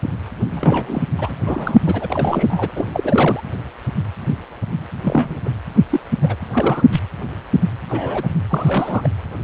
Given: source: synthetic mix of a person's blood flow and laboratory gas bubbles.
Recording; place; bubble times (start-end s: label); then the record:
Doppler ultrasound of blood flow; precordium
0.51-1.04 s: bubbles
1.17-1.31 s: bubbles
1.44-1.75 s: bubbles
1.85-2.70 s: bubbles
2.75-2.86 s: bubbles
2.93-3.43 s: bubbles
5.03-5.38 s: bubbles
5.45-5.50 s: bubbles
5.90-6.00 s: bubbles
6.21-6.35 s: bubbles
6.53-6.85 s: bubbles
6.92-7.00 s: bubbles
7.89-8.27 s: bubbles
8.49-9.08 s: bubbles
From the record:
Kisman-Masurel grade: 222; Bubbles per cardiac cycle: several, 3 to 8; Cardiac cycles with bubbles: 10 to 50%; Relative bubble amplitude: moderate (0.250 to 0.450); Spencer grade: 2 (many but less than half of the cardiac periods contain bubble signals, singularly or in groups); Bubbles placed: anywhere in the cardiac cycle